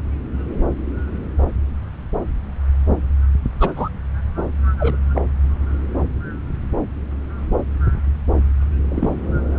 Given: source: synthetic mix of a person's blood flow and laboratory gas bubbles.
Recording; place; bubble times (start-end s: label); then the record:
Doppler ultrasound of blood flow; subclavian vein
3.60-3.71 s: bubbles
3.75-3.89 s: bubbles
4.79-4.96 s: bubbles
5.14-5.21 s: bubbles
8.88-9.13 s: bubbles
From the record:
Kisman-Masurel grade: 122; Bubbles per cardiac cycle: 1 to 2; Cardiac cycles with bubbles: 10 to 50%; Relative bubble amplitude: moderate (0.250 to 0.450); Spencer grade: 2 (many but less than half of the cardiac periods contain bubble signals, singularly or in groups); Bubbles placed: anywhere in the cardiac cycle